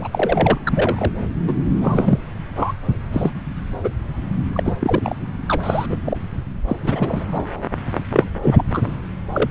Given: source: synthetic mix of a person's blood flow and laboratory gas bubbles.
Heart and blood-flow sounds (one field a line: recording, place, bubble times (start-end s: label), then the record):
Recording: Doppler ultrasound of blood flow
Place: subclavian vein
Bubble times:
0.00-0.07 s: bubbles
0.12-0.58 s: bubbles
0.66-1.11 s: bubbles
1.47-1.53 s: bubbles
1.80-2.21 s: bubbles
2.55-2.73 s: bubbles
3.12-3.31 s: bubbles
3.83-3.94 s: bubbles
4.53-4.73 s: bubbles
4.79-5.16 s: bubbles
5.47-5.86 s: bubbles
5.89-5.98 s: bubbles
6.04-6.17 s: bubbles
6.68-6.76 s: bubbles
6.83-7.26 s: bubbles
7.28-7.48 s: bubbles
8.11-8.29 s: bubbles
8.43-8.96 s: bubbles
9.31-9.51 s: bubbles
From the record:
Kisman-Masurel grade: 242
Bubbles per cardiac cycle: several, 3 to 8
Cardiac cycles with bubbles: 100%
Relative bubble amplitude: moderate (0.250 to 0.450)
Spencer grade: 3 (all of the cardiac periods contain showers or single bubble signals, but not dominating or overriding the cardiac motion signals)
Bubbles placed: anywhere in the cardiac cycle